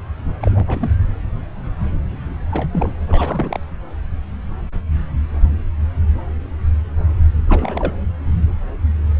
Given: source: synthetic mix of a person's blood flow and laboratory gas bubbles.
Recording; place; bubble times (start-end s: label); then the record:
Doppler ultrasound of blood flow; subclavian vein
0.41-0.90 s: bubbles
2.51-2.68 s: bubbles
2.72-2.95 s: bubbles
3.07-3.60 s: bubbles
7.47-7.93 s: bubbles
From the record:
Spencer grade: 2 (many but less than half of the cardiac periods contain bubble signals, singularly or in groups); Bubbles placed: anywhere in the cardiac cycle